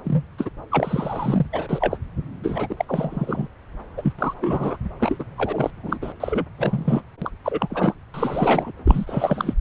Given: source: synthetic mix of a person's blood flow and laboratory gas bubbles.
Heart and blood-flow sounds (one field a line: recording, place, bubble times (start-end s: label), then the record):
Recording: Doppler ultrasound of blood flow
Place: subclavian vein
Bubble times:
0.04-0.22 s: bubbles
0.38-0.50 s: bubbles
0.71-1.46 s: bubbles
1.52-1.97 s: bubbles
2.43-2.85 s: bubbles
2.88-3.48 s: bubbles
3.97-4.13 s: bubbles
4.19-4.34 s: bubbles
4.41-4.77 s: bubbles
4.99-5.24 s: bubbles
5.38-5.71 s: bubbles
5.83-5.98 s: bubbles
6.02-6.12 s: bubbles
6.20-6.46 s: bubbles
6.58-7.02 s: bubbles
7.22-7.31 s: bubbles
7.44-7.94 s: bubbles
8.14-8.73 s: bubbles
8.85-9.54 s: bubbles
From the record:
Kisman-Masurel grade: 343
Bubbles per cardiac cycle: rolling drumbeat, 9 or more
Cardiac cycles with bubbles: 100%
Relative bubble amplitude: loud (0.450 to 0.775)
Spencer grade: 3 (all of the cardiac periods contain showers or single bubble signals, but not dominating or overriding the cardiac motion signals)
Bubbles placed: anywhere in the cardiac cycle